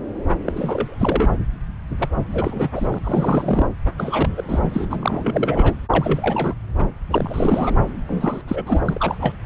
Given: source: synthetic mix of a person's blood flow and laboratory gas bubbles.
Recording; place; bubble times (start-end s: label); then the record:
Doppler ultrasound of blood flow; subclavian vein
0.46-0.52 s: bubbles
0.56-0.95 s: bubbles
0.99-1.31 s: bubbles
1.98-2.09 s: bubbles
2.33-2.69 s: bubbles
2.75-2.87 s: bubbles
2.91-2.98 s: bubbles
3.04-3.69 s: bubbles
3.98-4.34 s: bubbles
4.37-4.43 s: bubbles
4.48-4.59 s: bubbles
4.62-4.87 s: bubbles
4.90-5.74 s: bubbles
5.90-6.54 s: bubbles
6.78-6.87 s: bubbles
7.11-7.73 s: bubbles
8.08-8.41 s: bubbles
8.47-8.80 s: bubbles
8.85-9.35 s: bubbles
From the record:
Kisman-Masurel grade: 332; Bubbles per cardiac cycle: rolling drumbeat, 9 or more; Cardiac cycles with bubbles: 50 to 99%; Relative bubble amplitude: moderate (0.250 to 0.450); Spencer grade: 3 (all of the cardiac periods contain showers or single bubble signals, but not dominating or overriding the cardiac motion signals); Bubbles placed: anywhere in the cardiac cycle